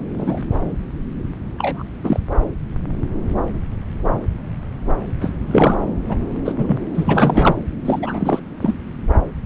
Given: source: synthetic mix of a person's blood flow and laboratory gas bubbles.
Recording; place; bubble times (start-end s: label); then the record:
Doppler ultrasound of blood flow; subclavian vein
0.18-0.39 s: bubbles
1.58-1.83 s: bubbles
2.04-2.20 s: bubbles
5.21-5.32 s: bubbles
5.51-5.78 s: bubbles
6.08-6.16 s: bubbles
6.45-6.52 s: bubbles
6.58-6.78 s: bubbles
6.95-7.56 s: bubbles
7.84-7.99 s: bubbles
8.02-8.40 s: bubbles
8.61-8.74 s: bubbles
From the record:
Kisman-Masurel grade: 233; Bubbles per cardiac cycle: several, 3 to 8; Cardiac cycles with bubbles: 50 to 99%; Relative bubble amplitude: loud (0.450 to 0.775); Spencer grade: 3 (all of the cardiac periods contain showers or single bubble signals, but not dominating or overriding the cardiac motion signals); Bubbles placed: anywhere in the cardiac cycle